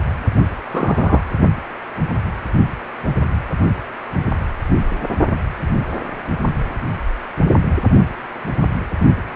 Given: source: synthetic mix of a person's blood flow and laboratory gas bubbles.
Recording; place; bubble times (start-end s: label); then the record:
Doppler ultrasound of blood flow; precordium
0.71-1.21 s: bubbles
From the record:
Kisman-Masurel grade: 123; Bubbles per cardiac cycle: 1 to 2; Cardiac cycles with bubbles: 10 to 50%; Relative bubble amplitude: loud (0.450 to 0.775); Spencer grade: 2 (many but less than half of the cardiac periods contain bubble signals, singularly or in groups); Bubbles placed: only in the low amplitude regions of the cardiac cycle